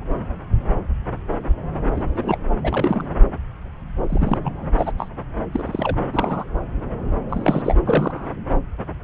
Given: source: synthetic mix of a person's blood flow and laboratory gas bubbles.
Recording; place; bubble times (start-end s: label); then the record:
Doppler ultrasound of blood flow; subclavian vein
1.96-2.38 s: bubbles
2.64-3.06 s: bubbles
4.09-4.38 s: bubbles
4.44-4.71 s: bubbles
4.78-4.92 s: bubbles
4.97-5.07 s: bubbles
5.52-5.96 s: bubbles
6.12-6.44 s: bubbles
7.29-7.75 s: bubbles
7.86-8.28 s: bubbles
From the record:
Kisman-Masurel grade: 232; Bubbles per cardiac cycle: several, 3 to 8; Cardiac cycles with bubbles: 50 to 99%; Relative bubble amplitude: moderate (0.250 to 0.450); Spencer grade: 3 (all of the cardiac periods contain showers or single bubble signals, but not dominating or overriding the cardiac motion signals); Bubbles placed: anywhere in the cardiac cycle